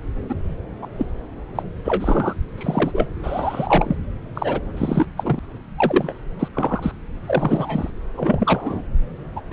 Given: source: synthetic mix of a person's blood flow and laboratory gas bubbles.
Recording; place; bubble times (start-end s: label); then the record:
Doppler ultrasound of blood flow; subclavian vein
0.29-0.35 s: bubbles
0.81-0.87 s: bubbles
0.97-1.06 s: bubbles
1.55-1.62 s: bubbles
1.84-2.33 s: bubbles
2.58-3.07 s: bubbles
3.23-3.96 s: bubbles
4.34-4.61 s: bubbles
4.76-5.05 s: bubbles
5.17-5.39 s: bubbles
5.78-6.18 s: bubbles
6.39-6.48 s: bubbles
6.54-6.92 s: bubbles
7.26-7.90 s: bubbles
8.15-8.83 s: bubbles
9.36-9.41 s: bubbles
9.50-9.53 s: bubbles
From the record:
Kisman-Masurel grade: 242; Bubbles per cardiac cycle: several, 3 to 8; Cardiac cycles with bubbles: 100%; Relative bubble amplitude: moderate (0.250 to 0.450); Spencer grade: 3 (all of the cardiac periods contain showers or single bubble signals, but not dominating or overriding the cardiac motion signals); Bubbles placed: anywhere in the cardiac cycle